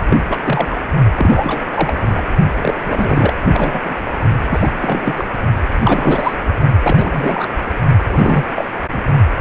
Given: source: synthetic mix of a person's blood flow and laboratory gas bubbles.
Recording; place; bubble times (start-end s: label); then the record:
Doppler ultrasound of blood flow; precordium
0.00-0.18 s: bubbles
0.29-0.38 s: bubbles
0.43-0.77 s: bubbles
1.15-1.64 s: bubbles
1.71-2.23 s: bubbles
2.61-2.75 s: bubbles
2.85-3.33 s: bubbles
3.47-3.95 s: bubbles
4.50-4.71 s: bubbles
4.81-5.13 s: bubbles
5.17-5.25 s: bubbles
5.79-6.33 s: bubbles
6.83-7.48 s: bubbles
8.11-8.44 s: bubbles
8.54-8.67 s: bubbles
8.92-8.99 s: bubbles
From the record:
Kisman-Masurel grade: 342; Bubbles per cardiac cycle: rolling drumbeat, 9 or more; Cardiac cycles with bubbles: 100%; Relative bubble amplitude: moderate (0.250 to 0.450); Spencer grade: 3 (all of the cardiac periods contain showers or single bubble signals, but not dominating or overriding the cardiac motion signals); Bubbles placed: only in the low amplitude regions of the cardiac cycle